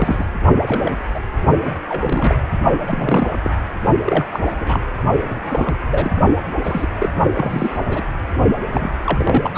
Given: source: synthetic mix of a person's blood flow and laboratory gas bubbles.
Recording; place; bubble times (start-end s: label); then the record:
Doppler ultrasound of blood flow; precordium
0.00-0.25 s: bubbles
0.65-0.97 s: bubbles
1.14-1.19 s: bubbles
1.65-1.73 s: bubbles
1.89-2.36 s: bubbles
2.87-3.40 s: bubbles
3.44-3.50 s: bubbles
4.04-4.26 s: bubbles
4.32-4.55 s: bubbles
4.59-4.86 s: bubbles
5.30-5.40 s: bubbles
5.45-5.75 s: bubbles
5.91-6.12 s: bubbles
6.64-6.89 s: bubbles
6.98-7.09 s: bubbles
7.33-7.79 s: bubbles
7.88-8.03 s: bubbles
8.72-8.90 s: bubbles
9.06-9.51 s: bubbles
9.54-9.58 s: bubbles
From the record:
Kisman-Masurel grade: 242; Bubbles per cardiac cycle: several, 3 to 8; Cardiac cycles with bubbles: 100%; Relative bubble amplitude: moderate (0.250 to 0.450); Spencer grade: 3 (all of the cardiac periods contain showers or single bubble signals, but not dominating or overriding the cardiac motion signals); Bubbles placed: only in the low amplitude regions of the cardiac cycle